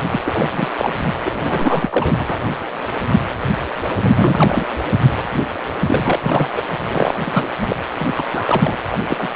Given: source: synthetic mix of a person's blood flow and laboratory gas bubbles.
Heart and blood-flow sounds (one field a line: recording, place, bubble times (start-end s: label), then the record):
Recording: Doppler ultrasound of blood flow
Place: precordium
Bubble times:
0.10-0.21 s: bubbles
0.24-0.48 s: bubbles
0.52-0.94 s: bubbles
1.25-2.37 s: bubbles
4.02-4.13 s: bubbles
4.17-4.66 s: bubbles
5.79-6.19 s: bubbles
6.23-6.48 s: bubbles
6.55-6.63 s: bubbles
6.88-7.14 s: bubbles
7.25-7.48 s: bubbles
7.60-7.76 s: bubbles
7.99-8.76 s: bubbles
8.92-8.97 s: bubbles
9.08-9.28 s: bubbles
9.32-9.36 s: bubbles
From the record:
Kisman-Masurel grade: 332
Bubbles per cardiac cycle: rolling drumbeat, 9 or more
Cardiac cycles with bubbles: 50 to 99%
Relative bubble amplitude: moderate (0.250 to 0.450)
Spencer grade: 3 (all of the cardiac periods contain showers or single bubble signals, but not dominating or overriding the cardiac motion signals)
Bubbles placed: anywhere in the cardiac cycle